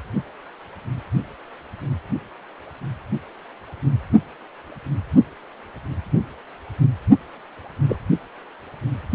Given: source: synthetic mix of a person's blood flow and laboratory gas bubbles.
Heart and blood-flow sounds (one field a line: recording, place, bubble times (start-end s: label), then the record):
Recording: Doppler ultrasound of blood flow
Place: precordium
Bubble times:
7.88-7.96 s: bubbles
From the record:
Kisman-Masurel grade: 122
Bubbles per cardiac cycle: 1 to 2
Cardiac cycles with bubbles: 10 to 50%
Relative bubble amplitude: moderate (0.250 to 0.450)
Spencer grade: 2 (many but less than half of the cardiac periods contain bubble signals, singularly or in groups)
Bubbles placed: only in the low amplitude regions of the cardiac cycle